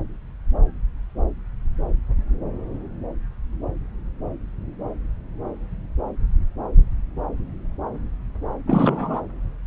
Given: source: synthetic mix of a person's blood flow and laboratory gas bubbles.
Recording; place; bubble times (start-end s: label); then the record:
Doppler ultrasound of blood flow; subclavian vein
8.67-9.21 s: bubbles
From the record:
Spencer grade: 1 (occasional bubble signal discernible with the cardiac motion signal, with majority of cardiac periods free of bubbles); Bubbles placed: anywhere in the cardiac cycle